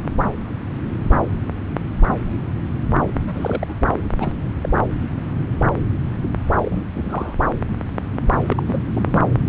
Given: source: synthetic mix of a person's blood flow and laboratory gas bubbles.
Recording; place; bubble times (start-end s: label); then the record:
Doppler ultrasound of blood flow; subclavian vein
3.27-3.73 s: bubbles
4.20-4.51 s: bubbles
4.63-4.69 s: bubbles
6.62-6.83 s: bubbles
6.94-7.35 s: bubbles
8.48-8.63 s: bubbles
8.67-9.29 s: bubbles
From the record:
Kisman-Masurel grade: 222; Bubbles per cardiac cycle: several, 3 to 8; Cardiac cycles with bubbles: 10 to 50%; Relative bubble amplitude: moderate (0.250 to 0.450); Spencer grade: 2 (many but less than half of the cardiac periods contain bubble signals, singularly or in groups); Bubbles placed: anywhere in the cardiac cycle